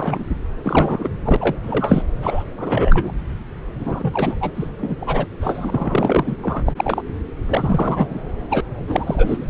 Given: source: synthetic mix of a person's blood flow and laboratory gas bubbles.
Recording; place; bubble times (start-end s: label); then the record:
Doppler ultrasound of blood flow; subclavian vein
0.00-0.24 s: bubbles
0.64-1.09 s: bubbles
1.22-1.36 s: bubbles
1.40-1.55 s: bubbles
1.63-2.02 s: bubbles
2.21-2.44 s: bubbles
2.56-3.12 s: bubbles
3.79-4.36 s: bubbles
4.40-4.52 s: bubbles
4.55-4.69 s: bubbles
4.78-4.96 s: bubbles
5.00-5.25 s: bubbles
5.40-6.36 s: bubbles
6.42-6.62 s: bubbles
6.66-6.72 s: bubbles
6.76-7.02 s: bubbles
7.46-8.21 s: bubbles
8.50-8.61 s: bubbles
8.88-9.50 s: bubbles
From the record:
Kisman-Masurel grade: 343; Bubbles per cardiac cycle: rolling drumbeat, 9 or more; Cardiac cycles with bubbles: 100%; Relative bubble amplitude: loud (0.450 to 0.775); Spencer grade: 3 (all of the cardiac periods contain showers or single bubble signals, but not dominating or overriding the cardiac motion signals); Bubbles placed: anywhere in the cardiac cycle